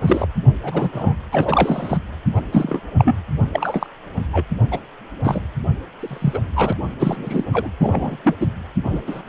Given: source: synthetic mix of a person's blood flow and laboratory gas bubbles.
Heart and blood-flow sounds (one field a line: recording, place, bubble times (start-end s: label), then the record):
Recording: Doppler ultrasound of blood flow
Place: precordium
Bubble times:
0.01-0.27 s: bubbles
0.62-0.90 s: bubbles
0.92-1.15 s: bubbles
1.31-1.98 s: bubbles
2.35-2.40 s: bubbles
2.52-2.80 s: bubbles
2.98-3.15 s: bubbles
3.53-3.87 s: bubbles
4.33-4.45 s: bubbles
4.71-4.79 s: bubbles
5.24-5.41 s: bubbles
6.00-6.39 s: bubbles
6.56-6.73 s: bubbles
6.99-7.44 s: bubbles
7.51-7.70 s: bubbles
7.79-8.17 s: bubbles
8.23-8.36 s: bubbles
8.40-8.47 s: bubbles
8.85-9.02 s: bubbles
9.06-9.22 s: bubbles
9.27-9.29 s: bubbles
From the record:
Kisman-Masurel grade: 242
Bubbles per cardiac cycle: several, 3 to 8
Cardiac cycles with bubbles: 100%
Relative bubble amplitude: moderate (0.250 to 0.450)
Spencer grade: 3 (all of the cardiac periods contain showers or single bubble signals, but not dominating or overriding the cardiac motion signals)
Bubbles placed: anywhere in the cardiac cycle